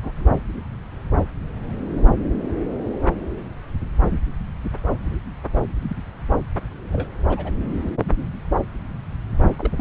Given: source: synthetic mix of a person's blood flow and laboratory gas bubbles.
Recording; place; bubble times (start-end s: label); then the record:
Doppler ultrasound of blood flow; subclavian vein
0.03-0.12 s: bubbles
0.16-0.29 s: bubbles
5.82-5.96 s: bubbles
6.92-7.08 s: bubbles
7.29-7.51 s: bubbles
9.58-9.72 s: bubbles
9.77-9.81 s: bubbles
From the record:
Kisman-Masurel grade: 121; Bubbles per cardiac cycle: 1 to 2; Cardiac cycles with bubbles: 10 to 50%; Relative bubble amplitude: barely perceptible (0.100 to 0.250); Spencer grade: 2 (many but less than half of the cardiac periods contain bubble signals, singularly or in groups); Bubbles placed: anywhere in the cardiac cycle